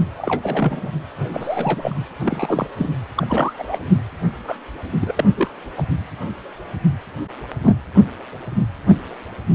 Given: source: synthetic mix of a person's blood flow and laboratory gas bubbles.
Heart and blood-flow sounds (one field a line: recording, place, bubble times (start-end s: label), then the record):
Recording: Doppler ultrasound of blood flow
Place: precordium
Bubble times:
0.18-0.91 s: bubbles
1.17-2.06 s: bubbles
2.20-2.67 s: bubbles
2.77-2.90 s: bubbles
3.16-3.79 s: bubbles
4.48-4.56 s: bubbles
5.00-5.12 s: bubbles
5.17-5.50 s: bubbles
5.77-5.83 s: bubbles
7.62-7.74 s: bubbles
7.96-8.04 s: bubbles
From the record:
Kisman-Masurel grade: 232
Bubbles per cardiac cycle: several, 3 to 8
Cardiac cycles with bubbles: 50 to 99%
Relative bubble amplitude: moderate (0.250 to 0.450)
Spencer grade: 3 (all of the cardiac periods contain showers or single bubble signals, but not dominating or overriding the cardiac motion signals)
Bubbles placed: anywhere in the cardiac cycle